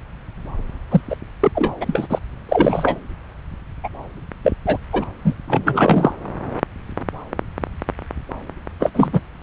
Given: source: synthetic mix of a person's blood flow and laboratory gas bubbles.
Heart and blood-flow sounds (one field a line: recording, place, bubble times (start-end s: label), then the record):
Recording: Doppler ultrasound of blood flow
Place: subclavian vein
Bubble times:
0.91-1.01 s: bubbles
1.09-1.16 s: bubbles
1.40-1.51 s: bubbles
1.54-1.72 s: bubbles
1.80-2.07 s: bubbles
2.10-2.19 s: bubbles
2.48-3.00 s: bubbles
3.83-3.89 s: bubbles
4.43-4.52 s: bubbles
4.66-4.77 s: bubbles
4.92-5.04 s: bubbles
5.24-5.34 s: bubbles
5.47-6.12 s: bubbles
8.80-8.90 s: bubbles
8.94-9.21 s: bubbles
From the record:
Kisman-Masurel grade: 233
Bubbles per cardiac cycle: several, 3 to 8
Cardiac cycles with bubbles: 50 to 99%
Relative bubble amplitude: loud (0.450 to 0.775)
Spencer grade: 3 (all of the cardiac periods contain showers or single bubble signals, but not dominating or overriding the cardiac motion signals)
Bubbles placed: anywhere in the cardiac cycle